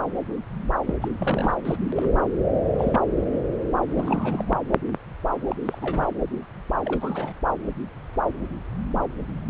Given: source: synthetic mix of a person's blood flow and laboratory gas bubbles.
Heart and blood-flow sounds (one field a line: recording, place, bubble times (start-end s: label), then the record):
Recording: Doppler ultrasound of blood flow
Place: subclavian vein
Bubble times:
0.86-0.94 s: bubbles
1.01-1.08 s: bubbles
1.19-1.54 s: bubbles
1.65-1.76 s: bubbles
1.96-2.12 s: bubbles
2.78-3.00 s: bubbles
3.95-4.52 s: bubbles
5.48-5.55 s: bubbles
5.66-5.79 s: bubbles
5.82-6.08 s: bubbles
6.85-7.33 s: bubbles
From the record:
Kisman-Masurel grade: 221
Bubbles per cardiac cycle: several, 3 to 8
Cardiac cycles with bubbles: 10 to 50%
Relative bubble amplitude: barely perceptible (0.100 to 0.250)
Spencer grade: 2 (many but less than half of the cardiac periods contain bubble signals, singularly or in groups)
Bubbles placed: anywhere in the cardiac cycle